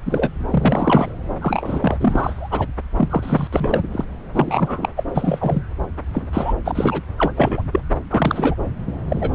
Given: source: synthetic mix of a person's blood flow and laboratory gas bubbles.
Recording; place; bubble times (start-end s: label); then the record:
Doppler ultrasound of blood flow; subclavian vein
0.05-0.33 s: bubbles
0.50-1.12 s: bubbles
1.41-2.67 s: bubbles
2.98-3.48 s: bubbles
3.52-3.88 s: bubbles
3.92-4.04 s: bubbles
4.34-4.89 s: bubbles
4.96-5.04 s: bubbles
5.14-5.62 s: bubbles
6.14-6.29 s: bubbles
6.33-6.54 s: bubbles
6.65-7.02 s: bubbles
7.17-7.33 s: bubbles
7.35-7.62 s: bubbles
7.72-7.80 s: bubbles
8.10-8.55 s: bubbles
8.86-8.92 s: bubbles
9.08-9.30 s: bubbles
From the record:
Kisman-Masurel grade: 243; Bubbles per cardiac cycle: several, 3 to 8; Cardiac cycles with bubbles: 100%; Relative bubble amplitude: loud (0.450 to 0.775); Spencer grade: 3 (all of the cardiac periods contain showers or single bubble signals, but not dominating or overriding the cardiac motion signals); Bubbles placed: anywhere in the cardiac cycle